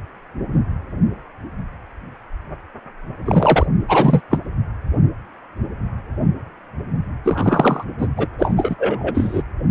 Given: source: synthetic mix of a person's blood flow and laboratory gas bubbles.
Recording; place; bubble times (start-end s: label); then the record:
Doppler ultrasound of blood flow; precordium
3.25-3.67 s: bubbles
3.88-4.21 s: bubbles
4.31-4.38 s: bubbles
7.24-7.83 s: bubbles
7.98-8.07 s: bubbles
8.16-8.27 s: bubbles
8.38-8.75 s: bubbles
8.78-9.42 s: bubbles
From the record:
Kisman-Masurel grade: 223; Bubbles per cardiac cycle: several, 3 to 8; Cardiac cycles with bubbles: 10 to 50%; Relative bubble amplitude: loud (0.450 to 0.775); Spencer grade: 2 (many but less than half of the cardiac periods contain bubble signals, singularly or in groups); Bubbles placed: anywhere in the cardiac cycle